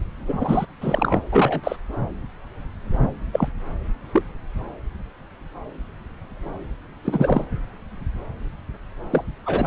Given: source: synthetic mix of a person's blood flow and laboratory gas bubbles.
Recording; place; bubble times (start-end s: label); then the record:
Doppler ultrasound of blood flow; subclavian vein
0.28-0.66 s: bubbles
0.80-1.19 s: bubbles
1.31-1.61 s: bubbles
1.64-1.76 s: bubbles
3.32-3.48 s: bubbles
4.12-4.23 s: bubbles
7.04-7.45 s: bubbles
9.10-9.23 s: bubbles
9.46-9.67 s: bubbles
From the record:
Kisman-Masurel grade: 232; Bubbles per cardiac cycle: several, 3 to 8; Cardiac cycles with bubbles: 50 to 99%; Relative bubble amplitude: moderate (0.250 to 0.450); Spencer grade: 3 (all of the cardiac periods contain showers or single bubble signals, but not dominating or overriding the cardiac motion signals); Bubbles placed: anywhere in the cardiac cycle